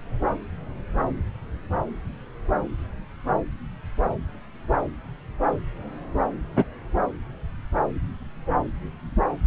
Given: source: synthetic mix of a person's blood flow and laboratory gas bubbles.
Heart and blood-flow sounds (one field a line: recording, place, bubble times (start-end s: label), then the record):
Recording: Doppler ultrasound of blood flow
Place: subclavian vein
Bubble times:
6.56-6.64 s: bubbles
From the record:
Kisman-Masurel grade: 123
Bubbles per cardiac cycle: 1 to 2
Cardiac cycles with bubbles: 10 to 50%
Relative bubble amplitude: loud (0.450 to 0.775)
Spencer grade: 2 (many but less than half of the cardiac periods contain bubble signals, singularly or in groups)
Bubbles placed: anywhere in the cardiac cycle